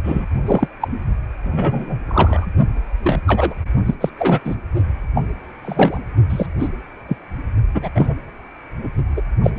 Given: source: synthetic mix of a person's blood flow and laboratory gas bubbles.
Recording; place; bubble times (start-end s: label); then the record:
Doppler ultrasound of blood flow; precordium
0.03-0.26 s: bubbles
0.46-0.67 s: bubbles
0.80-0.88 s: bubbles
1.44-1.99 s: bubbles
2.07-2.46 s: bubbles
3.04-3.20 s: bubbles
3.27-3.54 s: bubbles
3.85-3.95 s: bubbles
4.01-4.10 s: bubbles
4.18-4.41 s: bubbles
4.45-4.55 s: bubbles
5.14-5.25 s: bubbles
5.62-5.99 s: bubbles
6.29-6.46 s: bubbles
6.59-6.69 s: bubbles
7.08-7.17 s: bubbles
7.74-7.88 s: bubbles
7.95-8.15 s: bubbles
8.83-8.89 s: bubbles
9.16-9.22 s: bubbles
9.43-9.51 s: bubbles
9.56-9.59 s: bubbles
From the record:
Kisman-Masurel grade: 233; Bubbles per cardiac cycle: several, 3 to 8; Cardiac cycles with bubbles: 50 to 99%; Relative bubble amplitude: loud (0.450 to 0.775); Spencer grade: 3 (all of the cardiac periods contain showers or single bubble signals, but not dominating or overriding the cardiac motion signals); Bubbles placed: only in the low amplitude regions of the cardiac cycle